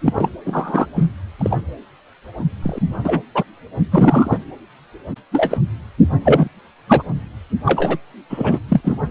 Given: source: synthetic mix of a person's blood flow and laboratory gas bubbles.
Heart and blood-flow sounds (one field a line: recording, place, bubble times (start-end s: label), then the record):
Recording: Doppler ultrasound of blood flow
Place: precordium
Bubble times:
0.05-0.29 s: bubbles
0.45-0.86 s: bubbles
0.95-1.11 s: bubbles
1.38-1.60 s: bubbles
2.62-2.78 s: bubbles
3.04-3.21 s: bubbles
3.34-3.43 s: bubbles
3.91-4.38 s: bubbles
5.32-5.58 s: bubbles
6.20-6.49 s: bubbles
6.88-7.03 s: bubbles
7.65-7.98 s: bubbles
8.29-8.59 s: bubbles
8.68-8.80 s: bubbles
8.84-8.97 s: bubbles
From the record:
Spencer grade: 3 (all of the cardiac periods contain showers or single bubble signals, but not dominating or overriding the cardiac motion signals)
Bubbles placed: anywhere in the cardiac cycle